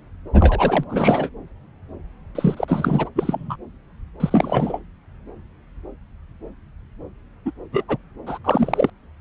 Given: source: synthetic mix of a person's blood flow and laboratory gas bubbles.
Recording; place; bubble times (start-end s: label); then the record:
Doppler ultrasound of blood flow; subclavian vein
0.33-0.84 s: bubbles
0.88-1.29 s: bubbles
2.35-2.65 s: bubbles
2.68-3.09 s: bubbles
3.15-3.56 s: bubbles
4.20-4.79 s: bubbles
7.45-7.51 s: bubbles
7.72-7.84 s: bubbles
7.88-7.97 s: bubbles
8.27-8.38 s: bubbles
8.44-8.90 s: bubbles
From the record:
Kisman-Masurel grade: 223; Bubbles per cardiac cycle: several, 3 to 8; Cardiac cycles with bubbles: 10 to 50%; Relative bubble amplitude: loud (0.450 to 0.775); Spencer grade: 2 (many but less than half of the cardiac periods contain bubble signals, singularly or in groups); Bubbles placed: anywhere in the cardiac cycle